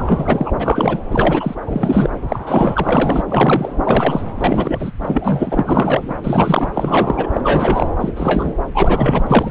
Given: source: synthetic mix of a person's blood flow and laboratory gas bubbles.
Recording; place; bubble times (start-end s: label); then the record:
Doppler ultrasound of blood flow; subclavian vein
0.00-0.53 s: bubbles
0.59-1.00 s: bubbles
1.10-1.55 s: bubbles
1.67-2.10 s: bubbles
2.29-2.40 s: bubbles
2.46-3.23 s: bubbles
3.28-3.73 s: bubbles
3.84-4.21 s: bubbles
4.36-4.92 s: bubbles
5.02-6.21 s: bubbles
6.24-6.71 s: bubbles
6.74-7.27 s: bubbles
7.33-7.41 s: bubbles
7.44-7.91 s: bubbles
8.00-8.12 s: bubbles
8.16-8.54 s: bubbles
8.74-9.51 s: bubbles
From the record:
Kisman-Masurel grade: 343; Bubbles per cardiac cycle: rolling drumbeat, 9 or more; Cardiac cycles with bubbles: 100%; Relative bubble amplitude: loud (0.450 to 0.775); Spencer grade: 3 (all of the cardiac periods contain showers or single bubble signals, but not dominating or overriding the cardiac motion signals); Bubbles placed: anywhere in the cardiac cycle